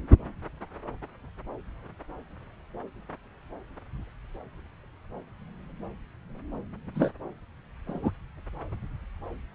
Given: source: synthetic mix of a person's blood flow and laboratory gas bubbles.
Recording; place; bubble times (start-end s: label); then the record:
Doppler ultrasound of blood flow; subclavian vein
6.95-7.11 s: bubbles
7.87-8.11 s: bubbles
From the record:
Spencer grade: 1 (occasional bubble signal discernible with the cardiac motion signal, with majority of cardiac periods free of bubbles); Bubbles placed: anywhere in the cardiac cycle